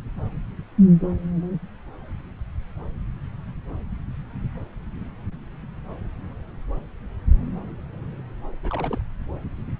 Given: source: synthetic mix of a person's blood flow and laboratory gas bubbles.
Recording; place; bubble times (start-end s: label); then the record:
Doppler ultrasound of blood flow; subclavian vein
8.62-9.02 s: bubbles
From the record:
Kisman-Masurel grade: 211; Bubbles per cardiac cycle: several, 3 to 8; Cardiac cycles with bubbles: 1 to 10%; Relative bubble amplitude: barely perceptible (0.100 to 0.250); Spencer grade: 1 (occasional bubble signal discernible with the cardiac motion signal, with majority of cardiac periods free of bubbles); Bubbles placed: anywhere in the cardiac cycle